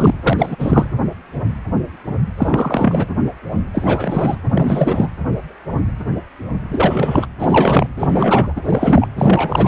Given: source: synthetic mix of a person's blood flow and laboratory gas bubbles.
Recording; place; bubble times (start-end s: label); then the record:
Doppler ultrasound of blood flow; precordium
0.00-0.14 s: bubbles
0.23-0.56 s: bubbles
0.58-0.86 s: bubbles
2.37-3.06 s: bubbles
3.74-4.38 s: bubbles
4.53-5.09 s: bubbles
6.68-7.26 s: bubbles
7.38-7.87 s: bubbles
7.96-8.52 s: bubbles
8.56-8.61 s: bubbles
8.65-9.08 s: bubbles
9.16-9.68 s: bubbles
From the record:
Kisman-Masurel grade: 333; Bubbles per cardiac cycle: rolling drumbeat, 9 or more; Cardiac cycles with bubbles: 50 to 99%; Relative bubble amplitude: loud (0.450 to 0.775); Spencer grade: 3 (all of the cardiac periods contain showers or single bubble signals, but not dominating or overriding the cardiac motion signals); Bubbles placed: anywhere in the cardiac cycle